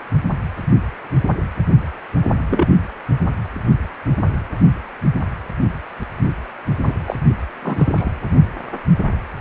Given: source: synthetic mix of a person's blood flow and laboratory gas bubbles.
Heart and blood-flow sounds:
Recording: Doppler ultrasound of blood flow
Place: precordium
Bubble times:
2.50-2.67 s: bubbles
6.85-6.93 s: bubbles
7.05-7.16 s: bubbles
7.62-8.11 s: bubbles
From the record:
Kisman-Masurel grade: 122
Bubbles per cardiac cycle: 1 to 2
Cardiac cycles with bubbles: 10 to 50%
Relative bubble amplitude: moderate (0.250 to 0.450)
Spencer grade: 2 (many but less than half of the cardiac periods contain bubble signals, singularly or in groups)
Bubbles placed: only in the low amplitude regions of the cardiac cycle

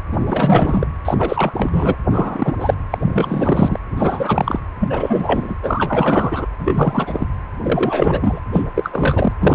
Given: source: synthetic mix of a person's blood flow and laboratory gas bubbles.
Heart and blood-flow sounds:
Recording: Doppler ultrasound of blood flow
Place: precordium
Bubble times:
0.11-0.87 s: bubbles
1.05-1.52 s: bubbles
1.54-1.96 s: bubbles
2.10-2.54 s: bubbles
2.59-2.74 s: bubbles
2.90-3.79 s: bubbles
3.97-4.59 s: bubbles
4.79-5.55 s: bubbles
5.62-6.46 s: bubbles
6.59-7.26 s: bubbles
7.63-8.41 s: bubbles
8.53-8.64 s: bubbles
8.75-9.32 s: bubbles
9.40-9.55 s: bubbles
From the record:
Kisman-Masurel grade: 343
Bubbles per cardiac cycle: rolling drumbeat, 9 or more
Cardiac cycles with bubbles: 100%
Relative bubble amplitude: loud (0.450 to 0.775)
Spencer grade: 3 (all of the cardiac periods contain showers or single bubble signals, but not dominating or overriding the cardiac motion signals)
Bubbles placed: anywhere in the cardiac cycle

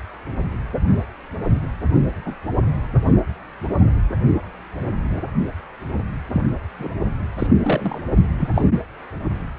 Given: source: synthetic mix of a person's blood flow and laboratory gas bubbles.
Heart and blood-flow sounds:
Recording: Doppler ultrasound of blood flow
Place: precordium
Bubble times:
2.25-2.34 s: bubbles
6.33-6.42 s: bubbles
6.79-6.89 s: bubbles
7.38-7.47 s: bubbles
7.64-8.00 s: bubbles
8.38-8.49 s: bubbles
8.54-8.62 s: bubbles
From the record:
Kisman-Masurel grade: 122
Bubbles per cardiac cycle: 1 to 2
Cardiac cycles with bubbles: 10 to 50%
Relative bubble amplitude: moderate (0.250 to 0.450)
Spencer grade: 2 (many but less than half of the cardiac periods contain bubble signals, singularly or in groups)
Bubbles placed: only in the low amplitude regions of the cardiac cycle

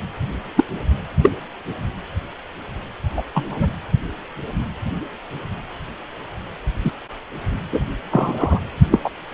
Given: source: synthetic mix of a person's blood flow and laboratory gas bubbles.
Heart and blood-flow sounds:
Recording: Doppler ultrasound of blood flow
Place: precordium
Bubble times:
0.56-0.64 s: bubbles
1.22-1.31 s: bubbles
3.16-3.22 s: bubbles
3.34-3.68 s: bubbles
6.85-6.92 s: bubbles
7.72-7.80 s: bubbles
8.11-8.60 s: bubbles
8.91-8.99 s: bubbles
9.04-9.10 s: bubbles
From the record:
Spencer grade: 2 (many but less than half of the cardiac periods contain bubble signals, singularly or in groups)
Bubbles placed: anywhere in the cardiac cycle

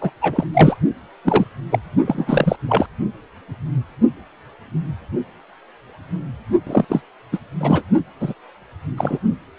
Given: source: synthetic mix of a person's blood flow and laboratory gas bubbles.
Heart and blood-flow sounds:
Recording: Doppler ultrasound of blood flow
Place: precordium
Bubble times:
0.01-0.10 s: bubbles
0.21-0.45 s: bubbles
0.53-0.77 s: bubbles
1.24-1.44 s: bubbles
1.70-1.79 s: bubbles
2.06-2.56 s: bubbles
2.69-2.86 s: bubbles
6.67-6.85 s: bubbles
6.88-7.02 s: bubbles
7.32-7.38 s: bubbles
7.60-7.82 s: bubbles
8.20-8.34 s: bubbles
8.96-9.19 s: bubbles
From the record:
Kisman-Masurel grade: 233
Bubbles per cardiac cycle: several, 3 to 8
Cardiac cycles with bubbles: 50 to 99%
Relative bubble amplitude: loud (0.450 to 0.775)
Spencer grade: 3 (all of the cardiac periods contain showers or single bubble signals, but not dominating or overriding the cardiac motion signals)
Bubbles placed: only in the low amplitude regions of the cardiac cycle

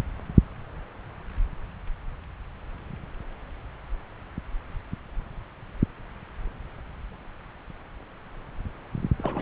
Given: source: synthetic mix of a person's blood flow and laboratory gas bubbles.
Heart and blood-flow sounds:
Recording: Doppler ultrasound of blood flow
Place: subclavian vein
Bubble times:
9.18-9.42 s: bubbles
From the record:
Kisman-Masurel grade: 221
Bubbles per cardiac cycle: several, 3 to 8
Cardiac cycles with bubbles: 10 to 50%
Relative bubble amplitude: barely perceptible (0.100 to 0.250)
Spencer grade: 2 (many but less than half of the cardiac periods contain bubble signals, singularly or in groups)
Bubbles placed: anywhere in the cardiac cycle

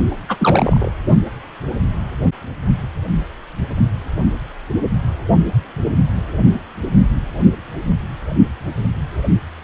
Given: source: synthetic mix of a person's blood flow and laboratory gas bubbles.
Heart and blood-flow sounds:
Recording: Doppler ultrasound of blood flow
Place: precordium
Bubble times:
0.28-0.92 s: bubbles
From the record:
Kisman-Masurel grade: 212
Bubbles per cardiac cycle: several, 3 to 8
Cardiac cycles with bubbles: 1 to 10%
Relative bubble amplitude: moderate (0.250 to 0.450)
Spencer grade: 1 (occasional bubble signal discernible with the cardiac motion signal, with majority of cardiac periods free of bubbles)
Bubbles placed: only in the low amplitude regions of the cardiac cycle

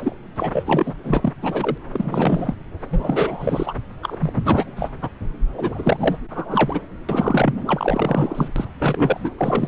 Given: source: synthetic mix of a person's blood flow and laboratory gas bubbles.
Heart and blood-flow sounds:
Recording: Doppler ultrasound of blood flow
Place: subclavian vein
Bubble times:
0.00-0.15 s: bubbles
0.35-0.94 s: bubbles
1.03-1.33 s: bubbles
1.42-1.77 s: bubbles
1.92-2.55 s: bubbles
2.90-3.75 s: bubbles
4.02-4.16 s: bubbles
4.19-4.90 s: bubbles
5.01-5.10 s: bubbles
5.54-6.17 s: bubbles
6.30-6.79 s: bubbles
7.08-7.53 s: bubbles
7.66-8.49 s: bubbles
8.56-8.65 s: bubbles
8.78-9.31 s: bubbles
9.38-9.68 s: bubbles
From the record:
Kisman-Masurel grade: 343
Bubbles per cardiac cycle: rolling drumbeat, 9 or more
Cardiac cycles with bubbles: 100%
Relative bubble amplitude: loud (0.450 to 0.775)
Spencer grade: 3 (all of the cardiac periods contain showers or single bubble signals, but not dominating or overriding the cardiac motion signals)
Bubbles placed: anywhere in the cardiac cycle

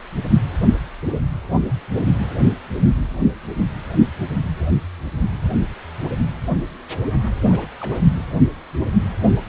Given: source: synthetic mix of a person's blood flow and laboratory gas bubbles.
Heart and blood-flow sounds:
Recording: Doppler ultrasound of blood flow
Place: precordium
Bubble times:
7.43-7.68 s: bubbles
7.80-8.22 s: bubbles
From the record:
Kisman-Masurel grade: 211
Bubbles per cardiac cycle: several, 3 to 8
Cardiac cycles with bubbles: 1 to 10%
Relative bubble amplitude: barely perceptible (0.100 to 0.250)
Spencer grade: 1 (occasional bubble signal discernible with the cardiac motion signal, with majority of cardiac periods free of bubbles)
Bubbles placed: anywhere in the cardiac cycle

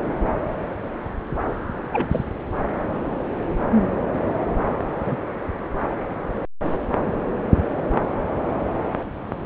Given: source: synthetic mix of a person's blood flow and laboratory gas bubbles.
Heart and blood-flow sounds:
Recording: Doppler ultrasound of blood flow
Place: subclavian vein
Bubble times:
1.92-2.08 s: bubbles
2.11-2.23 s: bubbles
5.05-5.16 s: bubbles
From the record:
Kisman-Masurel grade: 122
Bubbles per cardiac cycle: 1 to 2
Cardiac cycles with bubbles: 10 to 50%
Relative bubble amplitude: moderate (0.250 to 0.450)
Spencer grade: 2 (many but less than half of the cardiac periods contain bubble signals, singularly or in groups)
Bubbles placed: anywhere in the cardiac cycle

